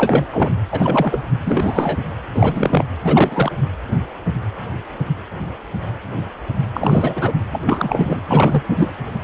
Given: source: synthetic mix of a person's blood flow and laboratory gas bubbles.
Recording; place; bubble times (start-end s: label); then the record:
Doppler ultrasound of blood flow; precordium
0.00-0.25 s: bubbles
0.33-0.52 s: bubbles
0.71-1.23 s: bubbles
1.45-2.00 s: bubbles
2.35-2.85 s: bubbles
3.02-3.51 s: bubbles
6.74-7.33 s: bubbles
7.50-8.20 s: bubbles
8.29-8.63 s: bubbles
8.69-8.93 s: bubbles
From the record:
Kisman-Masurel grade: 333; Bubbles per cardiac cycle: rolling drumbeat, 9 or more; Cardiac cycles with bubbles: 50 to 99%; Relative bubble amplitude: loud (0.450 to 0.775); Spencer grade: 3 (all of the cardiac periods contain showers or single bubble signals, but not dominating or overriding the cardiac motion signals); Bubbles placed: anywhere in the cardiac cycle